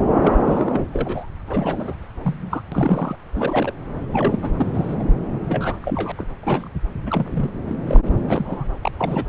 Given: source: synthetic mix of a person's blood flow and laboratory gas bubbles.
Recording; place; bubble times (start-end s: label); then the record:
Doppler ultrasound of blood flow; subclavian vein
0.21-0.43 s: bubbles
0.45-0.80 s: bubbles
0.93-1.27 s: bubbles
1.47-1.96 s: bubbles
2.24-2.62 s: bubbles
2.71-3.16 s: bubbles
3.35-3.74 s: bubbles
4.12-4.50 s: bubbles
4.59-4.95 s: bubbles
4.99-5.03 s: bubbles
5.48-5.76 s: bubbles
5.83-6.12 s: bubbles
6.17-6.25 s: bubbles
6.40-6.70 s: bubbles
7.06-7.50 s: bubbles
7.67-7.75 s: bubbles
7.87-8.00 s: bubbles
8.28-8.67 s: bubbles
8.82-8.92 s: bubbles
8.98-9.23 s: bubbles
From the record:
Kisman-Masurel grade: 242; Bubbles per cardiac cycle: several, 3 to 8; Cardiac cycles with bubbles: 100%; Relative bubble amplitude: moderate (0.250 to 0.450); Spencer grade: 3 (all of the cardiac periods contain showers or single bubble signals, but not dominating or overriding the cardiac motion signals); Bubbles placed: anywhere in the cardiac cycle